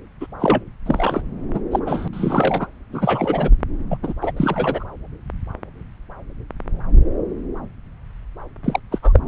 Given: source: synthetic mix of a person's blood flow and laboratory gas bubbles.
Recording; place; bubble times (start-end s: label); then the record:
Doppler ultrasound of blood flow; subclavian vein
0.20-0.27 s: bubbles
0.39-0.64 s: bubbles
0.86-1.22 s: bubbles
1.53-1.60 s: bubbles
1.71-1.79 s: bubbles
1.86-2.08 s: bubbles
2.13-2.67 s: bubbles
2.92-3.51 s: bubbles
3.90-3.98 s: bubbles
4.03-4.14 s: bubbles
4.21-4.32 s: bubbles
4.37-4.85 s: bubbles
8.64-8.80 s: bubbles
8.91-8.98 s: bubbles
9.02-9.20 s: bubbles
From the record:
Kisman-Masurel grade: 233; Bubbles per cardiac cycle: several, 3 to 8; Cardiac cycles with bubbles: 50 to 99%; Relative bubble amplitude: loud (0.450 to 0.775); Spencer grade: 3 (all of the cardiac periods contain showers or single bubble signals, but not dominating or overriding the cardiac motion signals); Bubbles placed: anywhere in the cardiac cycle